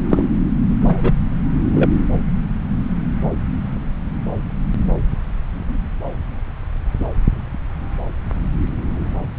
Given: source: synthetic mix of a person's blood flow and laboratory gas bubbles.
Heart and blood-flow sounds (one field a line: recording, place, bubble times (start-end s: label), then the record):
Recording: Doppler ultrasound of blood flow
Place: subclavian vein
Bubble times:
0.10-0.24 s: bubbles
0.80-1.12 s: bubbles
1.74-1.90 s: bubbles
7.00-7.06 s: bubbles
From the record:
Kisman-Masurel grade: 123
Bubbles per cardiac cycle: 1 to 2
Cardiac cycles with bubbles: 10 to 50%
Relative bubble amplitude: loud (0.450 to 0.775)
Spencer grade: 2 (many but less than half of the cardiac periods contain bubble signals, singularly or in groups)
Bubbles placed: anywhere in the cardiac cycle